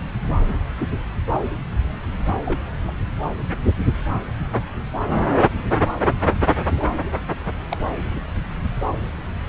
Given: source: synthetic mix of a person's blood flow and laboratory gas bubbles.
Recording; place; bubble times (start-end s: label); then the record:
Doppler ultrasound of blood flow; subclavian vein
2.45-2.62 s: bubbles
2.88-2.92 s: bubbles
6.77-6.87 s: bubbles
7.46-7.52 s: bubbles
7.69-7.77 s: bubbles
8.10-8.19 s: bubbles
From the record:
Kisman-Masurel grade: 122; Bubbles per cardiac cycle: 1 to 2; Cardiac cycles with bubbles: 10 to 50%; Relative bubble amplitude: moderate (0.250 to 0.450); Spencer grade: 2 (many but less than half of the cardiac periods contain bubble signals, singularly or in groups); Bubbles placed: anywhere in the cardiac cycle